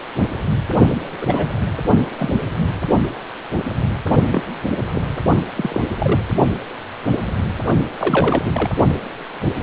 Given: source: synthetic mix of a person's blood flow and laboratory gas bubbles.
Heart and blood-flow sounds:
Doppler ultrasound of blood flow; precordium
0.90-0.95 s: bubbles
1.02-1.49 s: bubbles
1.96-2.01 s: bubbles
2.17-2.38 s: bubbles
4.31-4.42 s: bubbles
4.92-5.07 s: bubbles
5.55-5.81 s: bubbles
5.99-6.21 s: bubbles
7.98-8.71 s: bubbles
From the record:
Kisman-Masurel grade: 222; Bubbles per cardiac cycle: several, 3 to 8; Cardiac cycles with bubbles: 10 to 50%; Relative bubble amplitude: moderate (0.250 to 0.450); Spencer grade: 2 (many but less than half of the cardiac periods contain bubble signals, singularly or in groups); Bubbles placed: only in the low amplitude regions of the cardiac cycle

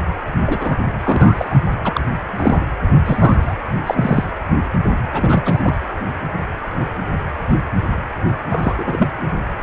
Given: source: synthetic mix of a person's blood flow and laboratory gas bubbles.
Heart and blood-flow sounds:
Doppler ultrasound of blood flow; precordium
0.46-0.78 s: bubbles
1.03-1.60 s: bubbles
1.84-2.01 s: bubbles
2.30-2.61 s: bubbles
3.05-3.56 s: bubbles
3.86-4.24 s: bubbles
5.12-5.75 s: bubbles
8.49-9.08 s: bubbles
From the record:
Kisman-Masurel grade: 233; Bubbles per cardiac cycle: several, 3 to 8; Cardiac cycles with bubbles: 50 to 99%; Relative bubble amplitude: loud (0.450 to 0.775); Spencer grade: 3 (all of the cardiac periods contain showers or single bubble signals, but not dominating or overriding the cardiac motion signals); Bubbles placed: anywhere in the cardiac cycle

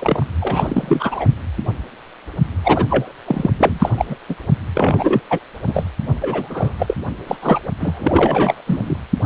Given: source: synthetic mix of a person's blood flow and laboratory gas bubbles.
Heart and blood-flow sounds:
Doppler ultrasound of blood flow; precordium
0.00-0.26 s: bubbles
0.41-1.26 s: bubbles
2.63-2.85 s: bubbles
2.88-3.12 s: bubbles
3.25-3.50 s: bubbles
3.59-3.90 s: bubbles
3.97-4.05 s: bubbles
4.09-4.16 s: bubbles
4.29-4.35 s: bubbles
4.75-5.21 s: bubbles
5.29-5.39 s: bubbles
5.67-5.86 s: bubbles
6.21-6.73 s: bubbles
6.79-6.94 s: bubbles
7.26-7.37 s: bubbles
7.42-7.59 s: bubbles
7.80-8.62 s: bubbles
8.66-8.83 s: bubbles
8.87-8.98 s: bubbles
9.23-9.26 s: bubbles
From the record:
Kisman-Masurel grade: 333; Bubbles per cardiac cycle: rolling drumbeat, 9 or more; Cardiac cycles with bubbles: 50 to 99%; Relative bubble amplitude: loud (0.450 to 0.775); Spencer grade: 3 (all of the cardiac periods contain showers or single bubble signals, but not dominating or overriding the cardiac motion signals); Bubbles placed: only in the low amplitude regions of the cardiac cycle

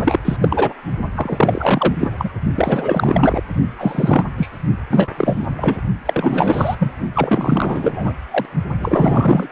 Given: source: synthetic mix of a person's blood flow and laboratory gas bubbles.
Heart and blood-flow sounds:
Doppler ultrasound of blood flow; precordium
0.00-0.19 s: bubbles
0.25-0.37 s: bubbles
0.41-0.73 s: bubbles
1.15-2.10 s: bubbles
2.18-2.30 s: bubbles
2.55-3.44 s: bubbles
3.78-4.25 s: bubbles
4.38-4.51 s: bubbles
4.90-5.09 s: bubbles
5.17-5.47 s: bubbles
5.56-5.81 s: bubbles
6.05-6.76 s: bubbles
6.79-6.92 s: bubbles
7.14-8.13 s: bubbles
8.31-8.46 s: bubbles
8.78-9.48 s: bubbles
From the record:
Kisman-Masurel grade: 343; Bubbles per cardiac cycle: rolling drumbeat, 9 or more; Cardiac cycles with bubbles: 100%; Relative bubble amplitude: loud (0.450 to 0.775); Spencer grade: 3 (all of the cardiac periods contain showers or single bubble signals, but not dominating or overriding the cardiac motion signals); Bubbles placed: only in the low amplitude regions of the cardiac cycle

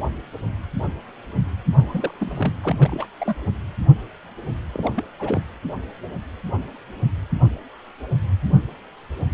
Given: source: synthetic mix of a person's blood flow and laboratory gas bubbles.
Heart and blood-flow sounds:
Doppler ultrasound of blood flow; precordium
1.78-2.14 s: bubbles
2.18-2.52 s: bubbles
2.64-3.06 s: bubbles
3.18-3.36 s: bubbles
4.73-5.04 s: bubbles
5.19-5.40 s: bubbles
From the record:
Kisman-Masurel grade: 221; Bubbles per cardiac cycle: several, 3 to 8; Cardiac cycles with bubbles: 10 to 50%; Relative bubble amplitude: barely perceptible (0.100 to 0.250); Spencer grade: 2 (many but less than half of the cardiac periods contain bubble signals, singularly or in groups); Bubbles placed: anywhere in the cardiac cycle

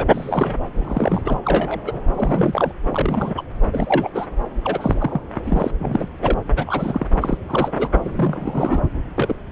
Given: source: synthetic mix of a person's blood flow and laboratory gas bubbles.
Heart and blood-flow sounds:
Doppler ultrasound of blood flow; subclavian vein
0.00-0.59 s: bubbles
0.77-1.21 s: bubbles
1.25-1.38 s: bubbles
1.44-1.79 s: bubbles
1.86-2.01 s: bubbles
2.15-2.72 s: bubbles
2.91-3.33 s: bubbles
3.37-3.42 s: bubbles
3.72-4.10 s: bubbles
4.15-4.26 s: bubbles
4.64-4.94 s: bubbles
4.99-5.21 s: bubbles
5.46-5.71 s: bubbles
5.79-6.08 s: bubbles
6.22-6.34 s: bubbles
6.56-7.06 s: bubbles
7.21-7.38 s: bubbles
7.48-7.72 s: bubbles
7.76-7.89 s: bubbles
8.00-8.81 s: bubbles
9.15-9.35 s: bubbles
From the record:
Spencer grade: 3 (all of the cardiac periods contain showers or single bubble signals, but not dominating or overriding the cardiac motion signals); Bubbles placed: anywhere in the cardiac cycle

